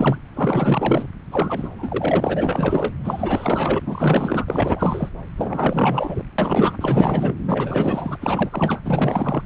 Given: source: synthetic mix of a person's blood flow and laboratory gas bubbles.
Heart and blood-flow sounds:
Doppler ultrasound of blood flow; subclavian vein
0.00-0.19 s: bubbles
0.35-1.09 s: bubbles
1.31-1.69 s: bubbles
1.75-2.94 s: bubbles
3.04-5.09 s: bubbles
5.37-6.24 s: bubbles
6.38-6.77 s: bubbles
6.81-7.35 s: bubbles
7.47-8.16 s: bubbles
8.21-8.80 s: bubbles
8.85-9.43 s: bubbles
From the record:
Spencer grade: 4 (maximum detectable bubble signal sounding continuously throughout systole and diastole of every cardiac period, and overriding the amplitude of the normal cardiac signals); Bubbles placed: anywhere in the cardiac cycle

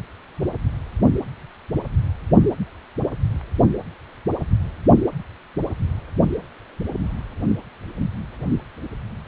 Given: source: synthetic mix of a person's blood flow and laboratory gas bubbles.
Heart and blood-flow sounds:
Doppler ultrasound of blood flow; precordium
no bubbles
From the record:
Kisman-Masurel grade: 000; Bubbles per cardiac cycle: 0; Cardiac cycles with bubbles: 0%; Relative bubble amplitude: no bubbles discernible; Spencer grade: 0 (complete lack of bubble signals)

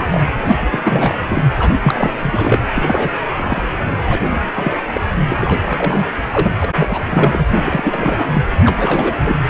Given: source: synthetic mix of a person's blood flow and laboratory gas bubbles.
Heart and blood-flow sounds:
Doppler ultrasound of blood flow; precordium
0.00-0.07 s: bubbles
0.10-0.23 s: bubbles
0.42-0.55 s: bubbles
0.61-0.68 s: bubbles
0.71-0.79 s: bubbles
0.84-1.43 s: bubbles
1.59-1.75 s: bubbles
1.81-2.10 s: bubbles
2.21-2.59 s: bubbles
2.75-3.10 s: bubbles
3.37-3.68 s: bubbles
3.90-3.97 s: bubbles
4.07-4.40 s: bubbles
4.54-4.78 s: bubbles
4.93-5.00 s: bubbles
5.28-5.36 s: bubbles
5.40-5.60 s: bubbles
5.65-6.05 s: bubbles
6.31-6.52 s: bubbles
6.61-6.71 s: bubbles
6.75-7.47 s: bubbles
7.52-8.27 s: bubbles
8.33-8.42 s: bubbles
8.64-9.48 s: bubbles
From the record:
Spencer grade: 3 (all of the cardiac periods contain showers or single bubble signals, but not dominating or overriding the cardiac motion signals); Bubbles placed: anywhere in the cardiac cycle

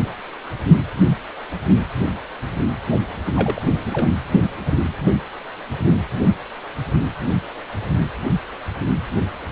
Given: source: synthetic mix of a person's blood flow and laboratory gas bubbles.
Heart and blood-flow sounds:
Doppler ultrasound of blood flow; precordium
3.34-3.62 s: bubbles
3.91-4.09 s: bubbles
From the record:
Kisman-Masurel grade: 212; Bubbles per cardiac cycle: several, 3 to 8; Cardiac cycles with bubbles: 1 to 10%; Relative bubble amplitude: moderate (0.250 to 0.450); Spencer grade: 1 (occasional bubble signal discernible with the cardiac motion signal, with majority of cardiac periods free of bubbles); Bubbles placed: anywhere in the cardiac cycle

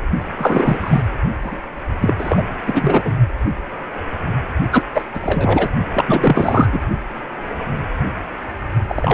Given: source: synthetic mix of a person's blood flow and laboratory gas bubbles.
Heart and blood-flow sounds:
Doppler ultrasound of blood flow; precordium
0.38-1.03 s: bubbles
1.42-1.60 s: bubbles
2.00-2.15 s: bubbles
2.19-2.43 s: bubbles
2.66-3.02 s: bubbles
3.04-3.14 s: bubbles
4.71-4.83 s: bubbles
4.94-5.04 s: bubbles
5.13-5.70 s: bubbles
5.94-6.79 s: bubbles
8.88-9.14 s: bubbles
From the record:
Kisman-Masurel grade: 333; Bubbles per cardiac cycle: rolling drumbeat, 9 or more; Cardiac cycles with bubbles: 50 to 99%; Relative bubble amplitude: loud (0.450 to 0.775); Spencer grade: 3 (all of the cardiac periods contain showers or single bubble signals, but not dominating or overriding the cardiac motion signals); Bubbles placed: only in the low amplitude regions of the cardiac cycle

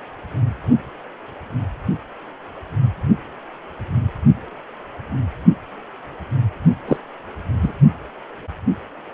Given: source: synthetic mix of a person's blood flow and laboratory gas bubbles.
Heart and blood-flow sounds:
Doppler ultrasound of blood flow; precordium
6.87-6.96 s: bubbles
7.62-7.73 s: bubbles
From the record:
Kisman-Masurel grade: 113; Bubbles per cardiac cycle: 1 to 2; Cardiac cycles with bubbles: 1 to 10%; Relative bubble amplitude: loud (0.450 to 0.775); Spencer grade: 1 (occasional bubble signal discernible with the cardiac motion signal, with majority of cardiac periods free of bubbles); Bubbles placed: only in the low amplitude regions of the cardiac cycle

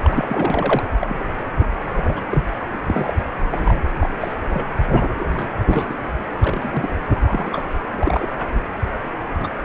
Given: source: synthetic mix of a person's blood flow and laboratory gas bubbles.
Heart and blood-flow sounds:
Doppler ultrasound of blood flow; precordium
0.02-0.84 s: bubbles
0.99-1.23 s: bubbles
1.59-1.67 s: bubbles
1.80-1.89 s: bubbles
1.94-2.22 s: bubbles
2.29-2.40 s: bubbles
2.86-3.13 s: bubbles
3.52-3.84 s: bubbles
3.99-4.09 s: bubbles
4.20-4.35 s: bubbles
4.50-4.65 s: bubbles
4.93-5.02 s: bubbles
5.19-5.55 s: bubbles
5.68-6.11 s: bubbles
6.41-6.90 s: bubbles
7.18-7.67 s: bubbles
7.91-8.46 s: bubbles
8.93-8.99 s: bubbles
9.35-9.49 s: bubbles
From the record:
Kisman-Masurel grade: 242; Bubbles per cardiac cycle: several, 3 to 8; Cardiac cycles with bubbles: 100%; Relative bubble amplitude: moderate (0.250 to 0.450); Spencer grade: 3 (all of the cardiac periods contain showers or single bubble signals, but not dominating or overriding the cardiac motion signals); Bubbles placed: anywhere in the cardiac cycle

